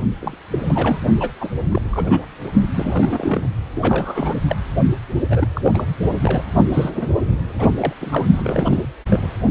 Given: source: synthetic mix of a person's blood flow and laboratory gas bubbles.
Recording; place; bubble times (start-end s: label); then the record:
Doppler ultrasound of blood flow; precordium
0.21-0.36 s: bubbles
0.51-0.59 s: bubbles
0.65-0.99 s: bubbles
1.19-1.32 s: bubbles
1.40-1.49 s: bubbles
1.71-2.25 s: bubbles
2.44-2.51 s: bubbles
2.62-2.67 s: bubbles
2.74-3.47 s: bubbles
3.75-4.36 s: bubbles
4.48-4.55 s: bubbles
5.29-5.46 s: bubbles
5.54-5.61 s: bubbles
5.63-5.71 s: bubbles
5.74-5.85 s: bubbles
6.20-6.44 s: bubbles
6.73-6.91 s: bubbles
6.94-7.07 s: bubbles
7.58-7.71 s: bubbles
7.77-7.93 s: bubbles
8.01-8.26 s: bubbles
8.36-8.88 s: bubbles
9.07-9.27 s: bubbles
From the record:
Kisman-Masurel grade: 342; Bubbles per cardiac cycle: rolling drumbeat, 9 or more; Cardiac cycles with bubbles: 100%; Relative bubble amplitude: moderate (0.250 to 0.450); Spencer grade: 3 (all of the cardiac periods contain showers or single bubble signals, but not dominating or overriding the cardiac motion signals); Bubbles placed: only in the low amplitude regions of the cardiac cycle